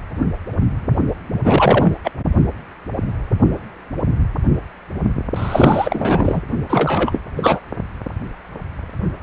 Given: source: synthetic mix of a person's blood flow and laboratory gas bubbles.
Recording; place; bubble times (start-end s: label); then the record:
Doppler ultrasound of blood flow; precordium
1.43-1.95 s: bubbles
2.04-2.11 s: bubbles
5.36-6.41 s: bubbles
6.69-7.22 s: bubbles
7.36-7.60 s: bubbles
From the record:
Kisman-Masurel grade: 223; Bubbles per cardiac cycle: several, 3 to 8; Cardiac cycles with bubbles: 10 to 50%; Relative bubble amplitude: loud (0.450 to 0.775); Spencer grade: 2 (many but less than half of the cardiac periods contain bubble signals, singularly or in groups); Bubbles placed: only in the low amplitude regions of the cardiac cycle